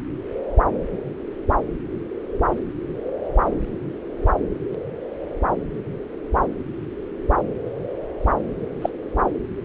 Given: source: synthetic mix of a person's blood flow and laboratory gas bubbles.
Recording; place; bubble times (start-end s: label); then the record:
Doppler ultrasound of blood flow; subclavian vein
8.81-8.89 s: bubbles
From the record:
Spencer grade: 1 (occasional bubble signal discernible with the cardiac motion signal, with majority of cardiac periods free of bubbles); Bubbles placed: anywhere in the cardiac cycle